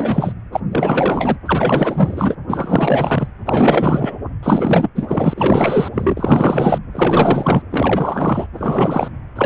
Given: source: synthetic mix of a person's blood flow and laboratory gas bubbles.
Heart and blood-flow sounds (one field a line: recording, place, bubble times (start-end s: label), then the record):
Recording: Doppler ultrasound of blood flow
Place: precordium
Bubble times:
0.00-0.33 s: bubbles
0.52-0.60 s: bubbles
0.71-1.38 s: bubbles
1.45-2.35 s: bubbles
2.48-3.27 s: bubbles
3.46-4.17 s: bubbles
4.42-4.90 s: bubbles
4.95-5.88 s: bubbles
5.92-6.78 s: bubbles
6.92-7.62 s: bubbles
7.70-8.47 s: bubbles
8.54-9.08 s: bubbles
9.35-9.46 s: bubbles
From the record:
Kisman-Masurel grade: 444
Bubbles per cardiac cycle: continuous sound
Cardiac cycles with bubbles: 100%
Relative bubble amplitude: maximal (0.775 to 0.999)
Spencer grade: 4 (maximum detectable bubble signal sounding continuously throughout systole and diastole of every cardiac period, and overriding the amplitude of the normal cardiac signals)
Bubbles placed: anywhere in the cardiac cycle